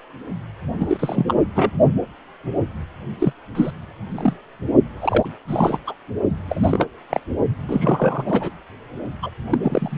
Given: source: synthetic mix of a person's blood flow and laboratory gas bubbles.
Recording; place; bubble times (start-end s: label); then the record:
Doppler ultrasound of blood flow; precordium
0.78-1.24 s: bubbles
1.27-1.34 s: bubbles
1.54-1.71 s: bubbles
3.19-3.33 s: bubbles
3.55-3.71 s: bubbles
4.09-4.33 s: bubbles
5.01-5.26 s: bubbles
5.48-5.79 s: bubbles
5.87-5.94 s: bubbles
6.49-6.86 s: bubbles
7.10-7.20 s: bubbles
7.67-8.50 s: bubbles
9.22-9.30 s: bubbles
9.50-9.58 s: bubbles
9.63-9.98 s: bubbles
From the record:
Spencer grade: 3 (all of the cardiac periods contain showers or single bubble signals, but not dominating or overriding the cardiac motion signals); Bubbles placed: only in the low amplitude regions of the cardiac cycle